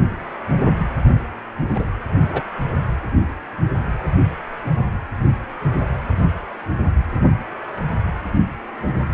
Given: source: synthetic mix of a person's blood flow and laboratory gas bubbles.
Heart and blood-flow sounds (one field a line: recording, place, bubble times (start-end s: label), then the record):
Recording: Doppler ultrasound of blood flow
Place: precordium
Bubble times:
1.75-1.85 s: bubbles
2.29-2.42 s: bubbles
From the record:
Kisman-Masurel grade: 122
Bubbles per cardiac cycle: 1 to 2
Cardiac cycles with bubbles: 10 to 50%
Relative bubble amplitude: moderate (0.250 to 0.450)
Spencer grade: 2 (many but less than half of the cardiac periods contain bubble signals, singularly or in groups)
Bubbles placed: only in the low amplitude regions of the cardiac cycle